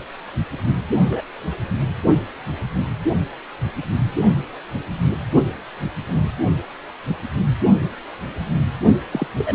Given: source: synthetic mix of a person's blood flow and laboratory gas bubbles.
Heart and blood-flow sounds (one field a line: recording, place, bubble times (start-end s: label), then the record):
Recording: Doppler ultrasound of blood flow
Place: precordium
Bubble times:
1.08-1.24 s: bubbles
6.08-6.28 s: bubbles
9.11-9.28 s: bubbles
9.37-9.55 s: bubbles
From the record:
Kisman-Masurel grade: 122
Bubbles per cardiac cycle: 1 to 2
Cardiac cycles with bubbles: 10 to 50%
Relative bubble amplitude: moderate (0.250 to 0.450)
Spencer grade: 2 (many but less than half of the cardiac periods contain bubble signals, singularly or in groups)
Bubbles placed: only in the low amplitude regions of the cardiac cycle